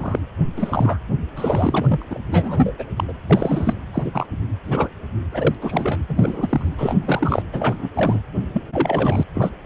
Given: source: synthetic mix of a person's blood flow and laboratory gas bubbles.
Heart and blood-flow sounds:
Doppler ultrasound of blood flow; precordium
0.00-0.20 s: bubbles
0.57-0.98 s: bubbles
1.35-2.03 s: bubbles
2.10-2.19 s: bubbles
2.31-2.73 s: bubbles
2.78-2.85 s: bubbles
2.96-3.04 s: bubbles
3.08-3.13 s: bubbles
3.29-3.74 s: bubbles
3.93-4.27 s: bubbles
4.64-4.89 s: bubbles
5.32-5.55 s: bubbles
5.61-6.00 s: bubbles
6.08-7.42 s: bubbles
7.52-7.89 s: bubbles
7.94-8.20 s: bubbles
8.53-8.62 s: bubbles
8.73-9.23 s: bubbles
9.35-9.50 s: bubbles
From the record:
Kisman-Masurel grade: 242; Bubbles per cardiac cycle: several, 3 to 8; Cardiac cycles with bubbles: 100%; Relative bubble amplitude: moderate (0.250 to 0.450); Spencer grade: 3 (all of the cardiac periods contain showers or single bubble signals, but not dominating or overriding the cardiac motion signals); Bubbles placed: anywhere in the cardiac cycle

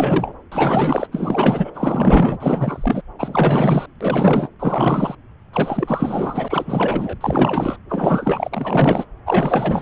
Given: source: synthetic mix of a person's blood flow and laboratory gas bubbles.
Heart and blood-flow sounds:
Doppler ultrasound of blood flow; subclavian vein
0.00-0.33 s: bubbles
0.52-1.08 s: bubbles
1.11-1.71 s: bubbles
1.74-3.02 s: bubbles
3.19-3.86 s: bubbles
4.00-4.49 s: bubbles
4.59-5.15 s: bubbles
5.53-7.17 s: bubbles
7.21-7.79 s: bubbles
7.88-9.05 s: bubbles
9.26-9.82 s: bubbles
From the record:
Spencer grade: 4 (maximum detectable bubble signal sounding continuously throughout systole and diastole of every cardiac period, and overriding the amplitude of the normal cardiac signals); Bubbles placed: anywhere in the cardiac cycle

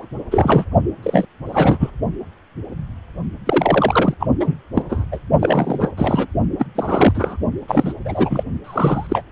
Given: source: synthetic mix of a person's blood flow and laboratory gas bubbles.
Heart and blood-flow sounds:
Doppler ultrasound of blood flow; precordium
0.00-0.06 s: bubbles
0.31-0.65 s: bubbles
1.03-1.26 s: bubbles
1.46-1.90 s: bubbles
3.46-4.14 s: bubbles
4.20-4.27 s: bubbles
4.40-4.54 s: bubbles
4.75-4.83 s: bubbles
4.89-5.04 s: bubbles
5.12-5.19 s: bubbles
5.39-5.92 s: bubbles
5.96-6.27 s: bubbles
6.58-6.65 s: bubbles
6.75-7.37 s: bubbles
7.68-7.94 s: bubbles
8.04-8.44 s: bubbles
8.64-9.22 s: bubbles
From the record:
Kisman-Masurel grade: 333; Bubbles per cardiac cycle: rolling drumbeat, 9 or more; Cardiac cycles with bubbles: 50 to 99%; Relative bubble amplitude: loud (0.450 to 0.775); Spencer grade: 3 (all of the cardiac periods contain showers or single bubble signals, but not dominating or overriding the cardiac motion signals); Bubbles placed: only in the low amplitude regions of the cardiac cycle

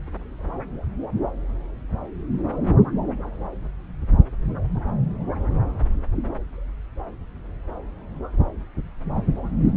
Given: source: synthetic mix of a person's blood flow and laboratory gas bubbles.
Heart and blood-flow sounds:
Doppler ultrasound of blood flow; subclavian vein
no bubbles
From the record:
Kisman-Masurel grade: 000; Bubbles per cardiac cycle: 0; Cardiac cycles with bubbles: 0%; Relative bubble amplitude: no bubbles discernible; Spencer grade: 0 (complete lack of bubble signals)

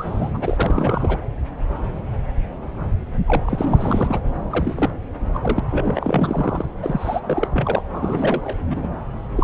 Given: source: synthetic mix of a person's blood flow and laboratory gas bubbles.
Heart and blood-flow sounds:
Doppler ultrasound of blood flow; subclavian vein
0.00-0.31 s: bubbles
0.33-1.19 s: bubbles
3.27-4.19 s: bubbles
4.50-4.90 s: bubbles
5.34-5.60 s: bubbles
5.70-6.65 s: bubbles
6.82-7.20 s: bubbles
7.23-7.47 s: bubbles
7.53-7.82 s: bubbles
7.88-8.56 s: bubbles
8.70-8.88 s: bubbles
9.36-9.44 s: bubbles
From the record:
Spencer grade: 3 (all of the cardiac periods contain showers or single bubble signals, but not dominating or overriding the cardiac motion signals); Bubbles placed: anywhere in the cardiac cycle

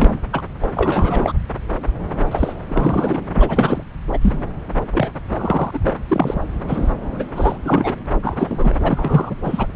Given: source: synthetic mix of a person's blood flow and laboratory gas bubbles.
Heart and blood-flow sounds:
Doppler ultrasound of blood flow; subclavian vein
0.00-0.17 s: bubbles
0.33-0.41 s: bubbles
0.61-0.68 s: bubbles
0.75-1.32 s: bubbles
2.31-2.52 s: bubbles
2.68-3.22 s: bubbles
3.32-3.83 s: bubbles
4.13-4.18 s: bubbles
4.21-4.33 s: bubbles
4.93-5.10 s: bubbles
5.28-5.79 s: bubbles
5.82-5.95 s: bubbles
6.08-6.40 s: bubbles
6.67-6.95 s: bubbles
7.14-7.28 s: bubbles
7.35-7.94 s: bubbles
8.06-8.08 s: bubbles
8.22-8.75 s: bubbles
8.82-9.35 s: bubbles
9.43-9.66 s: bubbles
From the record:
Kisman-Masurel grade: 342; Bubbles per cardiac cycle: rolling drumbeat, 9 or more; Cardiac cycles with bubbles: 100%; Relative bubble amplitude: moderate (0.250 to 0.450); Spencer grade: 3 (all of the cardiac periods contain showers or single bubble signals, but not dominating or overriding the cardiac motion signals); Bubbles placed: anywhere in the cardiac cycle

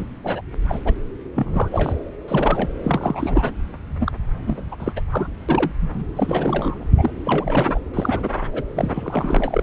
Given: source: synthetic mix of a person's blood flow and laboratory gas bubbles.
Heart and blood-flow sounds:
Doppler ultrasound of blood flow; subclavian vein
0.00-0.04 s: bubbles
0.23-0.41 s: bubbles
0.68-0.79 s: bubbles
0.85-0.93 s: bubbles
1.32-1.69 s: bubbles
1.71-2.00 s: bubbles
2.12-2.15 s: bubbles
2.27-2.69 s: bubbles
2.83-3.51 s: bubbles
4.00-4.12 s: bubbles
4.46-4.62 s: bubbles
4.71-4.76 s: bubbles
4.79-4.92 s: bubbles
4.96-5.00 s: bubbles
5.10-5.31 s: bubbles
5.48-5.71 s: bubbles
5.80-6.06 s: bubbles
6.16-6.86 s: bubbles
6.97-7.10 s: bubbles
7.23-7.79 s: bubbles
7.93-8.29 s: bubbles
8.53-8.62 s: bubbles
8.75-9.62 s: bubbles
From the record:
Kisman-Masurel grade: 342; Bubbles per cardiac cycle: rolling drumbeat, 9 or more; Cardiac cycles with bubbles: 100%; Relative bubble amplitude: moderate (0.250 to 0.450); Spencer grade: 3 (all of the cardiac periods contain showers or single bubble signals, but not dominating or overriding the cardiac motion signals); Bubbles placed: anywhere in the cardiac cycle

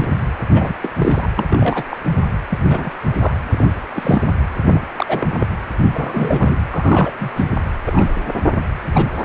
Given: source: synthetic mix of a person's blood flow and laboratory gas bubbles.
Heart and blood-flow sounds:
Doppler ultrasound of blood flow; precordium
0.00-0.08 s: bubbles
0.54-0.74 s: bubbles
0.82-0.91 s: bubbles
0.96-1.29 s: bubbles
1.36-1.44 s: bubbles
1.49-1.85 s: bubbles
1.90-1.98 s: bubbles
2.49-2.59 s: bubbles
2.65-2.90 s: bubbles
3.20-3.33 s: bubbles
3.50-3.66 s: bubbles
3.96-4.22 s: bubbles
4.67-4.81 s: bubbles
4.94-5.46 s: bubbles
5.94-6.57 s: bubbles
6.71-7.12 s: bubbles
7.19-7.32 s: bubbles
7.36-7.45 s: bubbles
7.86-8.13 s: bubbles
8.93-9.07 s: bubbles
9.18-9.24 s: bubbles
From the record:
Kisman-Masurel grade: 242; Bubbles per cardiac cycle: several, 3 to 8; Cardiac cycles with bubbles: 100%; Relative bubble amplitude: moderate (0.250 to 0.450); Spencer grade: 3 (all of the cardiac periods contain showers or single bubble signals, but not dominating or overriding the cardiac motion signals); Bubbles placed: anywhere in the cardiac cycle

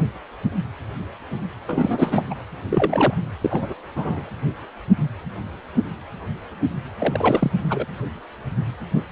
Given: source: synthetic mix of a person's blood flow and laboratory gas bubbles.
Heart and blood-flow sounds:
Doppler ultrasound of blood flow; precordium
1.66-2.34 s: bubbles
2.71-3.14 s: bubbles
3.41-3.73 s: bubbles
3.96-4.23 s: bubbles
6.98-7.51 s: bubbles
7.70-7.88 s: bubbles
From the record:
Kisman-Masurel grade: 222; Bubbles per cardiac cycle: several, 3 to 8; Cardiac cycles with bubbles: 10 to 50%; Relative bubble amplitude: moderate (0.250 to 0.450); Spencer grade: 2 (many but less than half of the cardiac periods contain bubble signals, singularly or in groups); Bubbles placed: anywhere in the cardiac cycle

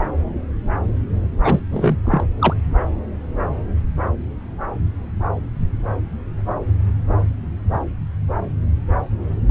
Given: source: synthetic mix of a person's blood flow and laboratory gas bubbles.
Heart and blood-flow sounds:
Doppler ultrasound of blood flow; subclavian vein
1.43-1.60 s: bubbles
1.71-1.96 s: bubbles
2.04-2.24 s: bubbles
2.39-2.54 s: bubbles
From the record:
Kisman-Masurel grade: 213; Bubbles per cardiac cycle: several, 3 to 8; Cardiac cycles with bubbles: 1 to 10%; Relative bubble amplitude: loud (0.450 to 0.775); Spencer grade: 1 (occasional bubble signal discernible with the cardiac motion signal, with majority of cardiac periods free of bubbles); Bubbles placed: anywhere in the cardiac cycle

